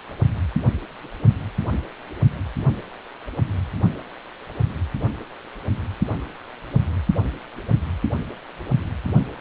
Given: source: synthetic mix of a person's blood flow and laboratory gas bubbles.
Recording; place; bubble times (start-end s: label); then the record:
Doppler ultrasound of blood flow; precordium
no bubbles
From the record:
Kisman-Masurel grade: 000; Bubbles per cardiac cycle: 0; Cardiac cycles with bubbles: 0%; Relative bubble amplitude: no bubbles discernible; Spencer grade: 0 (complete lack of bubble signals)